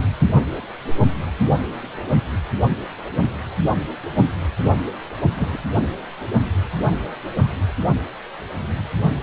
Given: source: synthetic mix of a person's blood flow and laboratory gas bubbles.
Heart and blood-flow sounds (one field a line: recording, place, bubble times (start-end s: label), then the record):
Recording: Doppler ultrasound of blood flow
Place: precordium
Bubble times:
5.37-5.58 s: bubbles
From the record:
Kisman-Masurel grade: 122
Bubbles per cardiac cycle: 1 to 2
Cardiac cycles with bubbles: 10 to 50%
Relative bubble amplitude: moderate (0.250 to 0.450)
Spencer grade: 2 (many but less than half of the cardiac periods contain bubble signals, singularly or in groups)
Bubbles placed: only in the low amplitude regions of the cardiac cycle